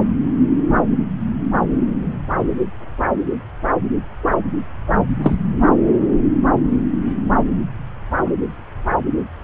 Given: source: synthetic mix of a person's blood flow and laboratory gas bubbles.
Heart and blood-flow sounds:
Doppler ultrasound of blood flow; subclavian vein
5.22-5.35 s: bubbles
From the record:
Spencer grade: 1 (occasional bubble signal discernible with the cardiac motion signal, with majority of cardiac periods free of bubbles); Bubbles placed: anywhere in the cardiac cycle

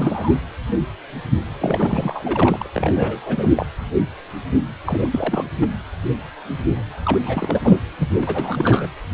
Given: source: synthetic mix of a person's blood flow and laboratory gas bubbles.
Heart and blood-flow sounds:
Doppler ultrasound of blood flow; precordium
0.00-0.40 s: bubbles
1.60-2.69 s: bubbles
2.74-3.50 s: bubbles
3.53-3.66 s: bubbles
4.86-5.44 s: bubbles
5.60-5.68 s: bubbles
7.04-7.78 s: bubbles
7.99-8.08 s: bubbles
8.21-8.88 s: bubbles
From the record:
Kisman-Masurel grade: 332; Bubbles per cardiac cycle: rolling drumbeat, 9 or more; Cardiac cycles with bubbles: 50 to 99%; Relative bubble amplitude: moderate (0.250 to 0.450); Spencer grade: 3 (all of the cardiac periods contain showers or single bubble signals, but not dominating or overriding the cardiac motion signals); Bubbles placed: anywhere in the cardiac cycle

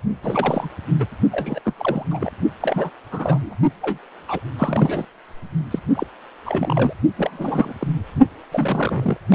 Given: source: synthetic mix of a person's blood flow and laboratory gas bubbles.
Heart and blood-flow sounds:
Doppler ultrasound of blood flow; precordium
0.23-0.69 s: bubbles
0.99-1.06 s: bubbles
1.31-1.59 s: bubbles
1.65-1.73 s: bubbles
1.77-2.08 s: bubbles
2.10-2.31 s: bubbles
2.60-2.90 s: bubbles
3.12-3.56 s: bubbles
3.81-3.98 s: bubbles
4.27-4.39 s: bubbles
4.58-5.05 s: bubbles
5.70-5.79 s: bubbles
5.94-6.06 s: bubbles
6.45-6.93 s: bubbles
7.17-7.75 s: bubbles
7.79-7.87 s: bubbles
8.51-9.17 s: bubbles
9.29-9.35 s: bubbles
From the record:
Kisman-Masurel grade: 342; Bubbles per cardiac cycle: rolling drumbeat, 9 or more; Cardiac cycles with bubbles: 100%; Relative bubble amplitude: moderate (0.250 to 0.450); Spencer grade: 3 (all of the cardiac periods contain showers or single bubble signals, but not dominating or overriding the cardiac motion signals); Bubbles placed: only in the low amplitude regions of the cardiac cycle

